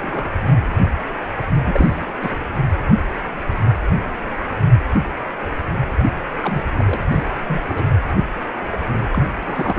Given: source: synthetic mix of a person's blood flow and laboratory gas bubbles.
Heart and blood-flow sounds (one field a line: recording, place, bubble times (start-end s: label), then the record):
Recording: Doppler ultrasound of blood flow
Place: precordium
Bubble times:
0.00-0.42 s: bubbles
0.52-0.55 s: bubbles
1.64-1.88 s: bubbles
1.95-2.18 s: bubbles
2.21-2.36 s: bubbles
5.99-6.03 s: bubbles
6.42-6.64 s: bubbles
6.72-7.00 s: bubbles
7.08-7.25 s: bubbles
7.31-7.36 s: bubbles
7.48-7.64 s: bubbles
7.69-7.85 s: bubbles
9.11-9.29 s: bubbles
9.42-9.79 s: bubbles
From the record:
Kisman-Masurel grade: 221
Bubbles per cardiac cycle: several, 3 to 8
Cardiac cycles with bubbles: 10 to 50%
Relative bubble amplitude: barely perceptible (0.100 to 0.250)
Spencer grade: 2 (many but less than half of the cardiac periods contain bubble signals, singularly or in groups)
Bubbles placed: anywhere in the cardiac cycle